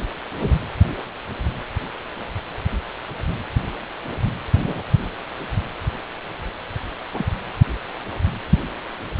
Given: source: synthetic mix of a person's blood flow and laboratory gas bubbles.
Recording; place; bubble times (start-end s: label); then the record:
Doppler ultrasound of blood flow; precordium
0.40-0.55 s: bubbles
4.58-4.83 s: bubbles
7.13-7.26 s: bubbles
From the record:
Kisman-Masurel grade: 121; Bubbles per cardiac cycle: 1 to 2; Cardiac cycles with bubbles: 10 to 50%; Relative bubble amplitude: barely perceptible (0.100 to 0.250); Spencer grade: 2 (many but less than half of the cardiac periods contain bubble signals, singularly or in groups); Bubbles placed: anywhere in the cardiac cycle